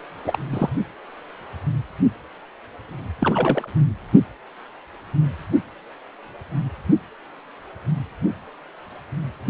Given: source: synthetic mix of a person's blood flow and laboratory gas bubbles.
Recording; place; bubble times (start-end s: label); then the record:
Doppler ultrasound of blood flow; precordium
0.24-0.38 s: bubbles
0.50-0.69 s: bubbles
3.19-3.68 s: bubbles
From the record:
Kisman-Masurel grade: 222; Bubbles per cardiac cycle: several, 3 to 8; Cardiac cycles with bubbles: 10 to 50%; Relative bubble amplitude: moderate (0.250 to 0.450); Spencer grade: 2 (many but less than half of the cardiac periods contain bubble signals, singularly or in groups); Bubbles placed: only in the low amplitude regions of the cardiac cycle